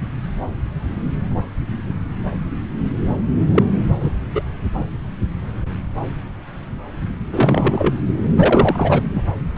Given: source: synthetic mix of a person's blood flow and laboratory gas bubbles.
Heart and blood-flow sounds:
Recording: Doppler ultrasound of blood flow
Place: subclavian vein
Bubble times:
3.54-3.62 s: bubbles
4.00-4.12 s: bubbles
4.34-4.42 s: bubbles
7.30-7.94 s: bubbles
8.25-8.27 s: bubbles
8.36-9.01 s: bubbles
9.14-9.23 s: bubbles
9.56-9.58 s: bubbles
From the record:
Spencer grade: 2 (many but less than half of the cardiac periods contain bubble signals, singularly or in groups)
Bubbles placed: anywhere in the cardiac cycle

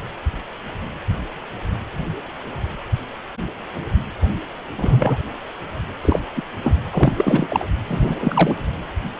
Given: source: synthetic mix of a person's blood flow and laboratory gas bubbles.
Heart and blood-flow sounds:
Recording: Doppler ultrasound of blood flow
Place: precordium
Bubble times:
4.78-5.18 s: bubbles
6.02-6.20 s: bubbles
6.36-6.42 s: bubbles
6.64-6.75 s: bubbles
6.92-7.64 s: bubbles
7.86-8.56 s: bubbles
From the record:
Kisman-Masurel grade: 233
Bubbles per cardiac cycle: several, 3 to 8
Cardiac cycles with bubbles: 50 to 99%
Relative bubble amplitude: loud (0.450 to 0.775)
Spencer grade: 3 (all of the cardiac periods contain showers or single bubble signals, but not dominating or overriding the cardiac motion signals)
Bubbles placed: anywhere in the cardiac cycle

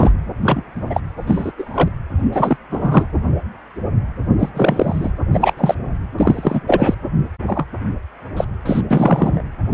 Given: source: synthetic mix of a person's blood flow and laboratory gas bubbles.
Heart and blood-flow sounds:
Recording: Doppler ultrasound of blood flow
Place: precordium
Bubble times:
0.00-0.13 s: bubbles
0.43-0.61 s: bubbles
0.90-1.00 s: bubbles
1.26-1.52 s: bubbles
1.58-1.89 s: bubbles
2.32-2.57 s: bubbles
2.71-3.07 s: bubbles
4.39-4.50 s: bubbles
4.54-5.11 s: bubbles
5.31-5.54 s: bubbles
5.57-5.75 s: bubbles
6.18-6.60 s: bubbles
6.67-6.94 s: bubbles
7.46-7.66 s: bubbles
8.37-8.45 s: bubbles
8.65-8.81 s: bubbles
8.90-9.41 s: bubbles
From the record:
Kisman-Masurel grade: 233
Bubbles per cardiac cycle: several, 3 to 8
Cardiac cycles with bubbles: 50 to 99%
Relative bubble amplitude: loud (0.450 to 0.775)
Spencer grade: 3 (all of the cardiac periods contain showers or single bubble signals, but not dominating or overriding the cardiac motion signals)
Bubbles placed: anywhere in the cardiac cycle

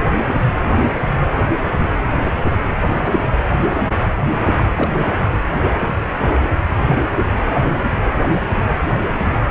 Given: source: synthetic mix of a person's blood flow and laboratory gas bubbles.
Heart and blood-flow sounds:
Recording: Doppler ultrasound of blood flow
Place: precordium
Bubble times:
4.46-4.64 s: bubbles
4.76-5.15 s: bubbles
From the record:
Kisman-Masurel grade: 221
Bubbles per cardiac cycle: several, 3 to 8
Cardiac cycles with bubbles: 10 to 50%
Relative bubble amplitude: barely perceptible (0.100 to 0.250)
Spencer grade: 2 (many but less than half of the cardiac periods contain bubble signals, singularly or in groups)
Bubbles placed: anywhere in the cardiac cycle

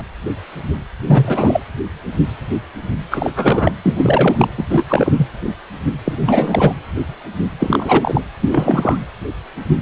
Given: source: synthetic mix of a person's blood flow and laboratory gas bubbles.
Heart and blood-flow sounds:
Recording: Doppler ultrasound of blood flow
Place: precordium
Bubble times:
0.00-0.03 s: bubbles
1.07-1.60 s: bubbles
3.10-3.31 s: bubbles
3.36-3.72 s: bubbles
3.83-4.48 s: bubbles
4.57-4.64 s: bubbles
4.69-4.83 s: bubbles
4.88-5.26 s: bubbles
6.04-6.75 s: bubbles
7.59-8.22 s: bubbles
8.41-8.98 s: bubbles
From the record:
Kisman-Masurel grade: 333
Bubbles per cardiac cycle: rolling drumbeat, 9 or more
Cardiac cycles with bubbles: 50 to 99%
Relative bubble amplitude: loud (0.450 to 0.775)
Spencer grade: 3 (all of the cardiac periods contain showers or single bubble signals, but not dominating or overriding the cardiac motion signals)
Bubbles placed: anywhere in the cardiac cycle

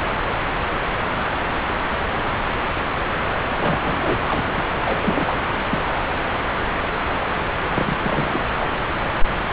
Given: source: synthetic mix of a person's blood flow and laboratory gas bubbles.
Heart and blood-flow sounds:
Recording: Doppler ultrasound of blood flow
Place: subclavian vein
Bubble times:
3.60-4.21 s: bubbles
4.28-4.62 s: bubbles
4.81-5.38 s: bubbles
5.71-5.78 s: bubbles
7.74-7.97 s: bubbles
8.03-8.50 s: bubbles
8.57-8.79 s: bubbles
From the record:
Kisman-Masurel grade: 221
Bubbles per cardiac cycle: several, 3 to 8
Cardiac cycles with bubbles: 10 to 50%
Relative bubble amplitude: barely perceptible (0.100 to 0.250)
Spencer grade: 2 (many but less than half of the cardiac periods contain bubble signals, singularly or in groups)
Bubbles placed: anywhere in the cardiac cycle

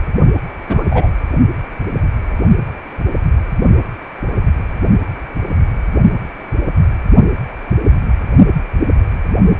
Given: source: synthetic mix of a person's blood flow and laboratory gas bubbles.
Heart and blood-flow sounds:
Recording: Doppler ultrasound of blood flow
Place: precordium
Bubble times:
0.68-0.84 s: bubbles
0.90-1.09 s: bubbles
From the record:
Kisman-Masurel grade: 113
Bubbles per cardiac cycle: 1 to 2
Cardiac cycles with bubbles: 1 to 10%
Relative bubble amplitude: loud (0.450 to 0.775)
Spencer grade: 1 (occasional bubble signal discernible with the cardiac motion signal, with majority of cardiac periods free of bubbles)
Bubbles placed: only in the low amplitude regions of the cardiac cycle

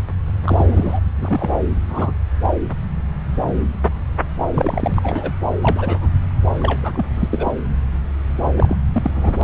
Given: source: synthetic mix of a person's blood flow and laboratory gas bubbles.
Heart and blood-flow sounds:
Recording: Doppler ultrasound of blood flow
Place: subclavian vein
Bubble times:
0.42-1.00 s: bubbles
1.16-1.50 s: bubbles
1.88-2.12 s: bubbles
2.42-2.50 s: bubbles
4.45-5.32 s: bubbles
5.62-6.08 s: bubbles
6.60-7.06 s: bubbles
7.14-7.29 s: bubbles
7.31-7.52 s: bubbles
8.56-8.77 s: bubbles
8.92-9.10 s: bubbles
9.15-9.34 s: bubbles
9.41-9.44 s: bubbles
From the record:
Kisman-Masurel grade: 232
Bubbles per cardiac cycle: several, 3 to 8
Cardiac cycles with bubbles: 50 to 99%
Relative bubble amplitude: moderate (0.250 to 0.450)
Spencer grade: 3 (all of the cardiac periods contain showers or single bubble signals, but not dominating or overriding the cardiac motion signals)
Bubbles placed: anywhere in the cardiac cycle

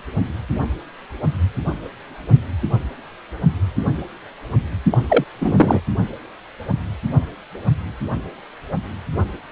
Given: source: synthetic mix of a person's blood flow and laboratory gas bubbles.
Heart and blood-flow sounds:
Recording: Doppler ultrasound of blood flow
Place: precordium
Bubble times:
4.92-4.98 s: bubbles
5.08-5.24 s: bubbles
5.38-5.80 s: bubbles
From the record:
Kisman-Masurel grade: 213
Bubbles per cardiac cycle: several, 3 to 8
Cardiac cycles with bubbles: 1 to 10%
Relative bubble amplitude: loud (0.450 to 0.775)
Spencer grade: 1 (occasional bubble signal discernible with the cardiac motion signal, with majority of cardiac periods free of bubbles)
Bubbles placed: only in the low amplitude regions of the cardiac cycle

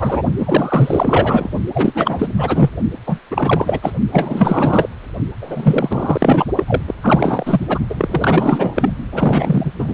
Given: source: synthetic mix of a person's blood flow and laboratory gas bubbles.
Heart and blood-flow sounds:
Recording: Doppler ultrasound of blood flow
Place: precordium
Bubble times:
0.00-0.22 s: bubbles
0.38-1.50 s: bubbles
1.73-2.26 s: bubbles
2.38-2.71 s: bubbles
3.06-3.21 s: bubbles
3.31-3.79 s: bubbles
3.82-3.92 s: bubbles
4.12-4.89 s: bubbles
5.41-6.46 s: bubbles
6.56-6.64 s: bubbles
6.67-6.82 s: bubbles
6.87-6.95 s: bubbles
7.02-7.67 s: bubbles
7.69-7.79 s: bubbles
7.90-8.90 s: bubbles
9.10-9.72 s: bubbles
9.79-9.94 s: bubbles
From the record:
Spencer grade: 4 (maximum detectable bubble signal sounding continuously throughout systole and diastole of every cardiac period, and overriding the amplitude of the normal cardiac signals)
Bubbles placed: only in the low amplitude regions of the cardiac cycle

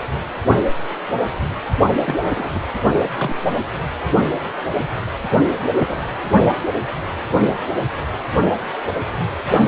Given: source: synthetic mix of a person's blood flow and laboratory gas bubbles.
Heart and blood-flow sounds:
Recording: Doppler ultrasound of blood flow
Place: precordium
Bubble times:
2.05-2.50 s: bubbles
2.54-2.60 s: bubbles
3.17-3.34 s: bubbles
5.75-5.99 s: bubbles
From the record:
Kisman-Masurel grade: 122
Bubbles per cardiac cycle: 1 to 2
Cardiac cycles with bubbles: 10 to 50%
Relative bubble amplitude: moderate (0.250 to 0.450)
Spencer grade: 2 (many but less than half of the cardiac periods contain bubble signals, singularly or in groups)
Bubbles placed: only in the low amplitude regions of the cardiac cycle

